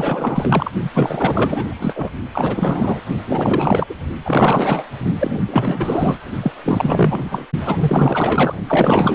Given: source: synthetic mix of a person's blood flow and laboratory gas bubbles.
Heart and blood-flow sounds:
Doppler ultrasound of blood flow; precordium
0.00-0.71 s: bubbles
0.93-2.10 s: bubbles
2.33-3.00 s: bubbles
3.27-3.85 s: bubbles
3.90-3.95 s: bubbles
4.25-4.84 s: bubbles
5.19-5.38 s: bubbles
5.47-6.16 s: bubbles
6.42-6.52 s: bubbles
6.64-7.46 s: bubbles
7.59-8.55 s: bubbles
8.67-9.15 s: bubbles
From the record:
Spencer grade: 4 (maximum detectable bubble signal sounding continuously throughout systole and diastole of every cardiac period, and overriding the amplitude of the normal cardiac signals); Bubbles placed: only in the low amplitude regions of the cardiac cycle

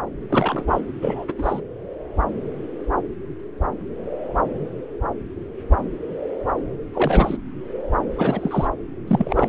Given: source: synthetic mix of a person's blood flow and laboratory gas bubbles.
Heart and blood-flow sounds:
Doppler ultrasound of blood flow; subclavian vein
0.30-0.65 s: bubbles
0.67-0.80 s: bubbles
1.01-1.33 s: bubbles
1.38-1.61 s: bubbles
6.93-7.37 s: bubbles
8.08-8.68 s: bubbles
9.07-9.48 s: bubbles
From the record:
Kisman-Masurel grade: 223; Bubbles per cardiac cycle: several, 3 to 8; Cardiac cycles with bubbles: 10 to 50%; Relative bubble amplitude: loud (0.450 to 0.775); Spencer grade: 2 (many but less than half of the cardiac periods contain bubble signals, singularly or in groups); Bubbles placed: anywhere in the cardiac cycle

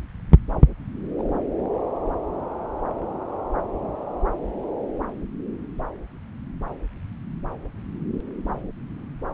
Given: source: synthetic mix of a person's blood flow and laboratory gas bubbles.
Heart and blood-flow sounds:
Doppler ultrasound of blood flow; subclavian vein
1.19-1.23 s: bubbles
From the record:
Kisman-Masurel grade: 111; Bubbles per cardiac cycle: 1 to 2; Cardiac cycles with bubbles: 1 to 10%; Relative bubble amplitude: barely perceptible (0.100 to 0.250); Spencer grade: 1 (occasional bubble signal discernible with the cardiac motion signal, with majority of cardiac periods free of bubbles); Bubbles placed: anywhere in the cardiac cycle

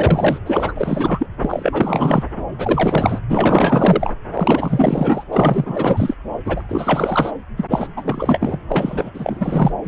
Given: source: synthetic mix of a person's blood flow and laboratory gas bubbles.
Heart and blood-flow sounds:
Doppler ultrasound of blood flow; subclavian vein
0.00-0.39 s: bubbles
0.46-1.27 s: bubbles
1.41-2.24 s: bubbles
2.37-2.45 s: bubbles
2.58-3.19 s: bubbles
3.29-4.13 s: bubbles
4.33-5.23 s: bubbles
5.31-6.14 s: bubbles
6.45-7.31 s: bubbles
7.56-7.64 s: bubbles
7.70-7.88 s: bubbles
7.96-8.58 s: bubbles
8.70-9.71 s: bubbles
9.83-9.88 s: bubbles
From the record:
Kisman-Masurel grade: 444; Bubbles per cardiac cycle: continuous sound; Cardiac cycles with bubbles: 100%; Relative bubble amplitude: maximal (0.775 to 0.999); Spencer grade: 4 (maximum detectable bubble signal sounding continuously throughout systole and diastole of every cardiac period, and overriding the amplitude of the normal cardiac signals); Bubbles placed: anywhere in the cardiac cycle

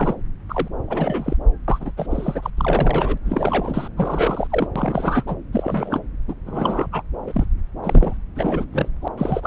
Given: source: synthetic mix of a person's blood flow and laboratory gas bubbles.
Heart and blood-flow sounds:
Doppler ultrasound of blood flow; subclavian vein
0.00-0.15 s: bubbles
0.49-0.69 s: bubbles
0.87-1.36 s: bubbles
1.68-1.91 s: bubbles
1.97-2.07 s: bubbles
2.10-2.50 s: bubbles
2.57-3.18 s: bubbles
3.25-3.88 s: bubbles
3.96-4.47 s: bubbles
4.50-4.67 s: bubbles
4.75-5.24 s: bubbles
5.27-5.36 s: bubbles
5.53-6.00 s: bubbles
6.28-6.34 s: bubbles
6.46-6.90 s: bubbles
6.92-7.02 s: bubbles
7.27-7.45 s: bubbles
7.83-8.17 s: bubbles
8.35-8.65 s: bubbles
8.72-8.88 s: bubbles
9.01-9.08 s: bubbles
9.17-9.47 s: bubbles
From the record:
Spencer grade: 3 (all of the cardiac periods contain showers or single bubble signals, but not dominating or overriding the cardiac motion signals); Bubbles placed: anywhere in the cardiac cycle

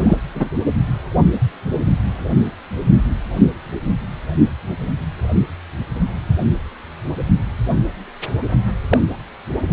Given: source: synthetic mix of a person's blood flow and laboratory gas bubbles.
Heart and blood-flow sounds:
Doppler ultrasound of blood flow; precordium
0.00-0.16 s: bubbles
0.34-0.49 s: bubbles
8.89-8.98 s: bubbles
From the record:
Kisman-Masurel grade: 123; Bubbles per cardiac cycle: 1 to 2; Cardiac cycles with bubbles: 10 to 50%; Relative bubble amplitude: loud (0.450 to 0.775); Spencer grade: 2 (many but less than half of the cardiac periods contain bubble signals, singularly or in groups); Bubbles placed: only in the low amplitude regions of the cardiac cycle

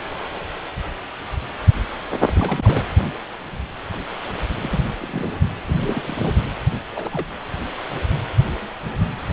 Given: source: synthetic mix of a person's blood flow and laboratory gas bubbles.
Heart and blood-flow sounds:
Doppler ultrasound of blood flow; precordium
2.35-2.84 s: bubbles
4.61-4.80 s: bubbles
5.00-5.31 s: bubbles
5.65-6.33 s: bubbles
6.91-7.27 s: bubbles
From the record:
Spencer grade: 2 (many but less than half of the cardiac periods contain bubble signals, singularly or in groups); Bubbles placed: anywhere in the cardiac cycle

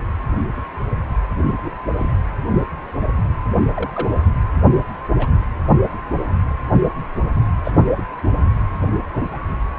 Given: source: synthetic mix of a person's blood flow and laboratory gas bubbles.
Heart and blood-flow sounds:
Doppler ultrasound of blood flow; precordium
1.57-1.74 s: bubbles
1.99-2.12 s: bubbles
3.76-4.17 s: bubbles
5.18-5.28 s: bubbles
7.64-7.71 s: bubbles
7.97-8.02 s: bubbles
9.31-9.38 s: bubbles
From the record:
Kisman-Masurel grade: 122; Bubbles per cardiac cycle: 1 to 2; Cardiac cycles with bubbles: 10 to 50%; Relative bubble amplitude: moderate (0.250 to 0.450); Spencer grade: 2 (many but less than half of the cardiac periods contain bubble signals, singularly or in groups); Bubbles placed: anywhere in the cardiac cycle

